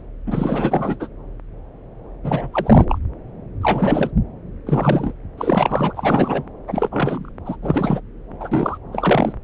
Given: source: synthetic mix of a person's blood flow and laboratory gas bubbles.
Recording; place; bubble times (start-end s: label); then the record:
Doppler ultrasound of blood flow; subclavian vein
0.26-0.96 s: bubbles
0.99-1.07 s: bubbles
2.24-2.48 s: bubbles
2.53-2.85 s: bubbles
2.89-2.98 s: bubbles
3.61-4.10 s: bubbles
4.66-5.13 s: bubbles
5.38-6.43 s: bubbles
6.67-7.30 s: bubbles
7.46-7.56 s: bubbles
7.62-8.01 s: bubbles
8.40-8.78 s: bubbles
8.92-9.33 s: bubbles
From the record:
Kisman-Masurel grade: 333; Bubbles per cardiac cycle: rolling drumbeat, 9 or more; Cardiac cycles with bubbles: 50 to 99%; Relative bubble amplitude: loud (0.450 to 0.775); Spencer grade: 3 (all of the cardiac periods contain showers or single bubble signals, but not dominating or overriding the cardiac motion signals); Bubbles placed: anywhere in the cardiac cycle